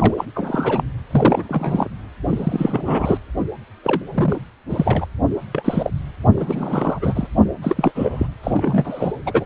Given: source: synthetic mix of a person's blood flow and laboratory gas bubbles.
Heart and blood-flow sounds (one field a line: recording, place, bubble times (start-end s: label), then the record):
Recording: Doppler ultrasound of blood flow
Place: precordium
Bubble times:
0.00-0.14 s: bubbles
0.17-0.25 s: bubbles
0.34-0.83 s: bubbles
1.10-1.88 s: bubbles
2.27-3.19 s: bubbles
3.83-4.02 s: bubbles
4.14-4.41 s: bubbles
4.70-5.06 s: bubbles
5.54-5.90 s: bubbles
6.36-6.98 s: bubbles
7.01-7.27 s: bubbles
7.62-7.92 s: bubbles
7.95-8.27 s: bubbles
8.43-9.12 s: bubbles
9.25-9.45 s: bubbles
From the record:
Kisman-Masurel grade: 342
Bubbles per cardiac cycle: rolling drumbeat, 9 or more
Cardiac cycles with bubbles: 100%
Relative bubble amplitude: moderate (0.250 to 0.450)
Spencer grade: 3 (all of the cardiac periods contain showers or single bubble signals, but not dominating or overriding the cardiac motion signals)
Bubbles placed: anywhere in the cardiac cycle